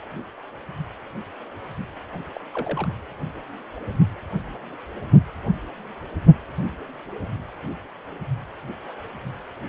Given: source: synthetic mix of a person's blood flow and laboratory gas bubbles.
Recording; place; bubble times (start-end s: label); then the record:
Doppler ultrasound of blood flow; precordium
2.12-2.19 s: bubbles
2.35-2.41 s: bubbles
2.54-2.88 s: bubbles
From the record:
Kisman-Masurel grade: 221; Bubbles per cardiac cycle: several, 3 to 8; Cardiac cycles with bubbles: 10 to 50%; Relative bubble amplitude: barely perceptible (0.100 to 0.250); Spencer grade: 2 (many but less than half of the cardiac periods contain bubble signals, singularly or in groups); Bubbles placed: anywhere in the cardiac cycle